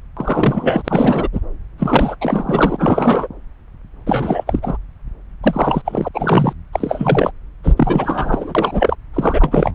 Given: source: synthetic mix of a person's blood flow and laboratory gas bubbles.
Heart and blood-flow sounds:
Doppler ultrasound of blood flow; subclavian vein
0.16-1.28 s: bubbles
1.32-1.40 s: bubbles
1.78-2.16 s: bubbles
2.21-3.28 s: bubbles
4.06-4.44 s: bubbles
4.46-4.77 s: bubbles
5.43-5.82 s: bubbles
5.84-6.08 s: bubbles
6.13-6.53 s: bubbles
6.72-7.31 s: bubbles
7.63-7.75 s: bubbles
7.77-8.96 s: bubbles
9.13-9.71 s: bubbles
From the record:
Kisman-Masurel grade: 333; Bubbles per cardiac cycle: rolling drumbeat, 9 or more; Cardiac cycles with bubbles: 50 to 99%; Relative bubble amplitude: loud (0.450 to 0.775); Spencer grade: 3 (all of the cardiac periods contain showers or single bubble signals, but not dominating or overriding the cardiac motion signals); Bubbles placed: anywhere in the cardiac cycle

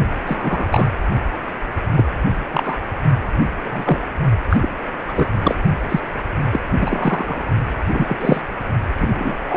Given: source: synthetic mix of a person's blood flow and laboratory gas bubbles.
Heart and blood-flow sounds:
Doppler ultrasound of blood flow; precordium
0.26-0.65 s: bubbles
0.71-0.91 s: bubbles
1.94-2.04 s: bubbles
2.52-2.75 s: bubbles
3.64-4.00 s: bubbles
4.49-4.69 s: bubbles
5.07-5.28 s: bubbles
5.38-5.55 s: bubbles
5.88-6.01 s: bubbles
6.53-6.61 s: bubbles
6.79-7.42 s: bubbles
7.94-8.18 s: bubbles
8.20-8.41 s: bubbles
8.99-9.38 s: bubbles
9.46-9.57 s: bubbles
From the record:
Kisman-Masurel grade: 233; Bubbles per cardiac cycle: several, 3 to 8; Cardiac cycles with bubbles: 50 to 99%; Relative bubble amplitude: loud (0.450 to 0.775); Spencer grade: 3 (all of the cardiac periods contain showers or single bubble signals, but not dominating or overriding the cardiac motion signals); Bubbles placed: only in the low amplitude regions of the cardiac cycle

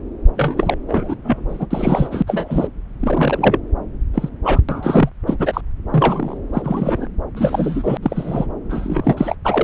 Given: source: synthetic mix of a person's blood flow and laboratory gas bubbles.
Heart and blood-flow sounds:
Doppler ultrasound of blood flow; subclavian vein
0.36-0.76 s: bubbles
0.89-1.16 s: bubbles
1.24-1.46 s: bubbles
1.49-1.66 s: bubbles
1.71-2.23 s: bubbles
2.27-2.68 s: bubbles
3.00-3.58 s: bubbles
4.14-4.29 s: bubbles
4.44-4.59 s: bubbles
4.69-5.10 s: bubbles
5.27-5.36 s: bubbles
5.38-5.61 s: bubbles
5.89-6.37 s: bubbles
6.53-7.07 s: bubbles
7.36-7.97 s: bubbles
8.02-8.46 s: bubbles
8.70-9.36 s: bubbles
9.45-9.63 s: bubbles
From the record:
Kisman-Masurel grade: 243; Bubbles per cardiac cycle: several, 3 to 8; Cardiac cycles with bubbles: 100%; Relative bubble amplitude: loud (0.450 to 0.775); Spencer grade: 3 (all of the cardiac periods contain showers or single bubble signals, but not dominating or overriding the cardiac motion signals); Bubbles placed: anywhere in the cardiac cycle

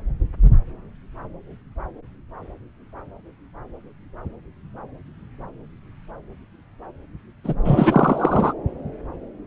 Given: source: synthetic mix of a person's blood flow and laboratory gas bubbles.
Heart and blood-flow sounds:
Doppler ultrasound of blood flow; subclavian vein
7.44-7.53 s: bubbles
7.65-8.53 s: bubbles
From the record:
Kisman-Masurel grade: 213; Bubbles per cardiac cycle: several, 3 to 8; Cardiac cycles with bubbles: 1 to 10%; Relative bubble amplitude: loud (0.450 to 0.775); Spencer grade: 1 (occasional bubble signal discernible with the cardiac motion signal, with majority of cardiac periods free of bubbles); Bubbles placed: anywhere in the cardiac cycle

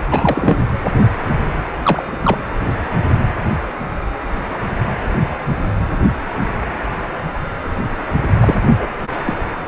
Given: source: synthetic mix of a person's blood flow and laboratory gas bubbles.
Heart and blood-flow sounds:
Doppler ultrasound of blood flow; precordium
0.11-0.59 s: bubbles
1.83-2.38 s: bubbles
8.40-8.55 s: bubbles
8.78-8.89 s: bubbles
9.25-9.33 s: bubbles
From the record:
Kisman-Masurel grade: 223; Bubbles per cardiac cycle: several, 3 to 8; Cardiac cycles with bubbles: 10 to 50%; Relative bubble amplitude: loud (0.450 to 0.775); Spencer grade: 2 (many but less than half of the cardiac periods contain bubble signals, singularly or in groups); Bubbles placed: anywhere in the cardiac cycle

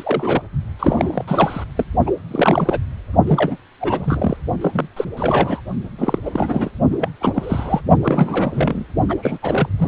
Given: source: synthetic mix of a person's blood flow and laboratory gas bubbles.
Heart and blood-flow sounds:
Doppler ultrasound of blood flow; precordium
0.00-0.41 s: bubbles
0.79-1.25 s: bubbles
1.27-1.64 s: bubbles
1.75-1.84 s: bubbles
2.06-2.10 s: bubbles
2.31-2.79 s: bubbles
3.26-3.57 s: bubbles
3.81-4.37 s: bubbles
4.61-4.88 s: bubbles
4.97-5.05 s: bubbles
5.17-5.61 s: bubbles
5.98-6.19 s: bubbles
6.24-6.72 s: bubbles
6.90-7.09 s: bubbles
7.21-7.81 s: bubbles
8.01-8.85 s: bubbles
9.08-9.15 s: bubbles
9.22-9.38 s: bubbles
9.42-9.69 s: bubbles
9.77-9.87 s: bubbles
From the record:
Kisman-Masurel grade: 342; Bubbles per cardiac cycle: rolling drumbeat, 9 or more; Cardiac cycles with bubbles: 100%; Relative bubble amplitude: moderate (0.250 to 0.450); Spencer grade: 3 (all of the cardiac periods contain showers or single bubble signals, but not dominating or overriding the cardiac motion signals); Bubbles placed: only in the low amplitude regions of the cardiac cycle

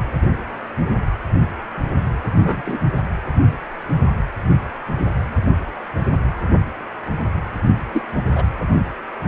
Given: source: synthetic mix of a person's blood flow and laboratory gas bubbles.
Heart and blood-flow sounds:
Doppler ultrasound of blood flow; precordium
2.38-2.62 s: bubbles
2.65-2.81 s: bubbles
7.92-8.02 s: bubbles
8.32-8.43 s: bubbles
From the record:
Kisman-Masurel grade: 123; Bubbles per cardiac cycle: 1 to 2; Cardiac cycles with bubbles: 10 to 50%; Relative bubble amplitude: loud (0.450 to 0.775); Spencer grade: 2 (many but less than half of the cardiac periods contain bubble signals, singularly or in groups); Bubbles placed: anywhere in the cardiac cycle

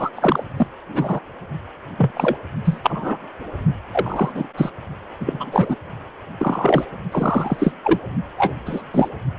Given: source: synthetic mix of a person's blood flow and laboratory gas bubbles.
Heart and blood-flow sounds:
Doppler ultrasound of blood flow; precordium
0.00-0.10 s: bubbles
0.15-0.44 s: bubbles
0.56-0.67 s: bubbles
0.94-1.20 s: bubbles
1.98-2.11 s: bubbles
2.15-2.38 s: bubbles
2.65-2.79 s: bubbles
2.83-3.17 s: bubbles
3.92-4.31 s: bubbles
4.34-4.48 s: bubbles
4.57-4.70 s: bubbles
5.20-5.76 s: bubbles
6.38-6.87 s: bubbles
7.11-7.74 s: bubbles
7.83-7.99 s: bubbles
8.38-8.54 s: bubbles
8.66-8.83 s: bubbles
8.93-9.09 s: bubbles
From the record:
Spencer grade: 3 (all of the cardiac periods contain showers or single bubble signals, but not dominating or overriding the cardiac motion signals); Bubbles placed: only in the low amplitude regions of the cardiac cycle

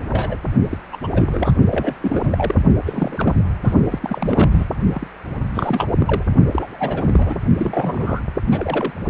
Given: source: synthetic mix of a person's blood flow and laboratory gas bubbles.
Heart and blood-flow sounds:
Doppler ultrasound of blood flow; precordium
0.08-0.38 s: bubbles
0.71-0.78 s: bubbles
0.92-0.97 s: bubbles
1.02-1.07 s: bubbles
1.10-1.55 s: bubbles
1.70-1.94 s: bubbles
2.00-2.62 s: bubbles
2.85-3.35 s: bubbles
3.63-3.75 s: bubbles
3.89-4.66 s: bubbles
4.92-5.07 s: bubbles
5.54-5.85 s: bubbles
5.98-6.23 s: bubbles
6.51-7.40 s: bubbles
7.56-8.21 s: bubbles
8.52-8.94 s: bubbles
From the record:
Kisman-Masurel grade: 342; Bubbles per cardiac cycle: rolling drumbeat, 9 or more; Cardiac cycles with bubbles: 100%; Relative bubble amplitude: moderate (0.250 to 0.450); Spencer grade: 3 (all of the cardiac periods contain showers or single bubble signals, but not dominating or overriding the cardiac motion signals); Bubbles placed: only in the low amplitude regions of the cardiac cycle

